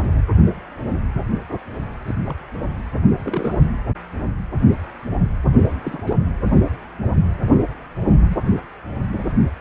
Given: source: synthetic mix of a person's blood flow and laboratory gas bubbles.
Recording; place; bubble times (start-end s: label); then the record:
Doppler ultrasound of blood flow; precordium
2.06-2.15 s: bubbles
2.26-2.44 s: bubbles
3.17-3.58 s: bubbles
5.82-6.17 s: bubbles
8.28-8.37 s: bubbles
From the record:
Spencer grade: 2 (many but less than half of the cardiac periods contain bubble signals, singularly or in groups); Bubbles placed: only in the low amplitude regions of the cardiac cycle